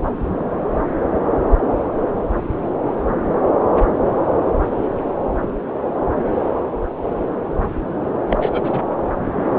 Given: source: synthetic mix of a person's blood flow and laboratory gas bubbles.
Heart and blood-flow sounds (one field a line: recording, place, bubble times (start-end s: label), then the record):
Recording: Doppler ultrasound of blood flow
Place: subclavian vein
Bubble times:
8.30-8.79 s: bubbles
From the record:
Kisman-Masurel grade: 212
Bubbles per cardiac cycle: several, 3 to 8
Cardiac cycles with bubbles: 1 to 10%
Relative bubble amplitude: moderate (0.250 to 0.450)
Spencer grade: 1 (occasional bubble signal discernible with the cardiac motion signal, with majority of cardiac periods free of bubbles)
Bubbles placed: anywhere in the cardiac cycle